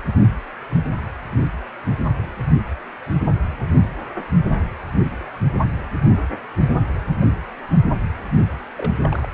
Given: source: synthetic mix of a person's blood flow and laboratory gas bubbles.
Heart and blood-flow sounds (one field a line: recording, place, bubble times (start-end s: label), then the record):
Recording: Doppler ultrasound of blood flow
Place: precordium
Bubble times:
8.77-8.92 s: bubbles
9.04-9.27 s: bubbles
From the record:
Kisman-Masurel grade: 111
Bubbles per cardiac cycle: 1 to 2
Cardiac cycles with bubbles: 1 to 10%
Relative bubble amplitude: barely perceptible (0.100 to 0.250)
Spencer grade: 1 (occasional bubble signal discernible with the cardiac motion signal, with majority of cardiac periods free of bubbles)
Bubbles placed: only in the low amplitude regions of the cardiac cycle